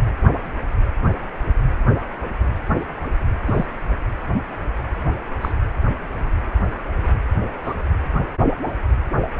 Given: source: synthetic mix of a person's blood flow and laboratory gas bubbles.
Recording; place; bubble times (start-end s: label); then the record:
Doppler ultrasound of blood flow; precordium
3.46-3.66 s: bubbles
5.41-5.52 s: bubbles
7.64-7.74 s: bubbles
From the record:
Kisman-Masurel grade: 122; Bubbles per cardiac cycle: 1 to 2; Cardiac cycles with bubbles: 10 to 50%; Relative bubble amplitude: moderate (0.250 to 0.450); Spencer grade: 2 (many but less than half of the cardiac periods contain bubble signals, singularly or in groups); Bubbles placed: anywhere in the cardiac cycle